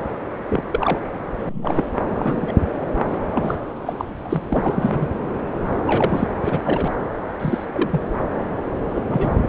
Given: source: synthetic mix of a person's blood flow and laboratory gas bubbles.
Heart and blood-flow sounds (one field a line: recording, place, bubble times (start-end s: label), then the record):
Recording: Doppler ultrasound of blood flow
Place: subclavian vein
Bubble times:
0.49-0.63 s: bubbles
0.72-1.00 s: bubbles
1.39-1.85 s: bubbles
2.04-2.53 s: bubbles
3.05-3.56 s: bubbles
3.86-3.93 s: bubbles
3.98-4.05 s: bubbles
4.17-4.20 s: bubbles
4.23-4.42 s: bubbles
4.50-5.07 s: bubbles
5.85-6.28 s: bubbles
6.44-6.93 s: bubbles
7.39-7.66 s: bubbles
7.70-8.04 s: bubbles
8.95-9.02 s: bubbles
9.06-9.47 s: bubbles
From the record:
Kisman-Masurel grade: 232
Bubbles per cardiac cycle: several, 3 to 8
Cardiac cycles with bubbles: 50 to 99%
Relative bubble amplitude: moderate (0.250 to 0.450)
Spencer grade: 3 (all of the cardiac periods contain showers or single bubble signals, but not dominating or overriding the cardiac motion signals)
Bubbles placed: anywhere in the cardiac cycle